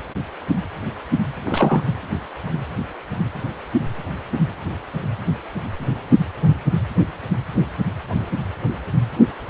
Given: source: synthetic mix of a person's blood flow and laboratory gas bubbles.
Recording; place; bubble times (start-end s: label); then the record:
Doppler ultrasound of blood flow; precordium
1.46-1.84 s: bubbles
From the record:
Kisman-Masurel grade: 113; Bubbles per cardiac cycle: 1 to 2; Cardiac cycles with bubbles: 1 to 10%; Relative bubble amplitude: loud (0.450 to 0.775); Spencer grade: 1 (occasional bubble signal discernible with the cardiac motion signal, with majority of cardiac periods free of bubbles); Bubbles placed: only in the low amplitude regions of the cardiac cycle